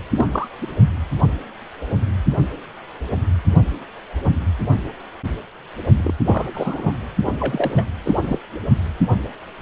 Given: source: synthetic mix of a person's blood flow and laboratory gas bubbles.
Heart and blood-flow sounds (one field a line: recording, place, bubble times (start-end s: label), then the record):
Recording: Doppler ultrasound of blood flow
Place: precordium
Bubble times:
0.15-0.26 s: bubbles
0.32-0.48 s: bubbles
0.61-0.67 s: bubbles
5.97-6.12 s: bubbles
6.26-6.45 s: bubbles
6.54-6.93 s: bubbles
7.24-7.32 s: bubbles
7.39-7.91 s: bubbles
8.05-8.13 s: bubbles
8.23-8.38 s: bubbles
From the record:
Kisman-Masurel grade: 222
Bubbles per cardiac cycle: several, 3 to 8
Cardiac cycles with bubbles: 10 to 50%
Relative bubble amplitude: moderate (0.250 to 0.450)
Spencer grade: 2 (many but less than half of the cardiac periods contain bubble signals, singularly or in groups)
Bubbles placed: only in the low amplitude regions of the cardiac cycle